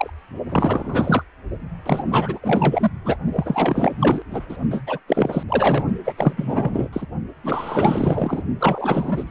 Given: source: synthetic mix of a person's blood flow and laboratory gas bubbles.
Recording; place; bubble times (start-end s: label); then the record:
Doppler ultrasound of blood flow; precordium
0.00-0.10 s: bubbles
0.49-1.24 s: bubbles
1.86-2.03 s: bubbles
2.08-2.39 s: bubbles
2.42-2.90 s: bubbles
3.04-3.17 s: bubbles
3.32-3.96 s: bubbles
3.99-4.22 s: bubbles
4.30-4.42 s: bubbles
4.49-4.58 s: bubbles
4.71-4.83 s: bubbles
4.87-4.99 s: bubbles
5.08-5.43 s: bubbles
5.48-5.85 s: bubbles
6.04-6.13 s: bubbles
6.17-6.88 s: bubbles
6.92-7.06 s: bubbles
7.43-8.45 s: bubbles
8.59-9.30 s: bubbles
From the record:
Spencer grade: 4 (maximum detectable bubble signal sounding continuously throughout systole and diastole of every cardiac period, and overriding the amplitude of the normal cardiac signals); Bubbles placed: only in the low amplitude regions of the cardiac cycle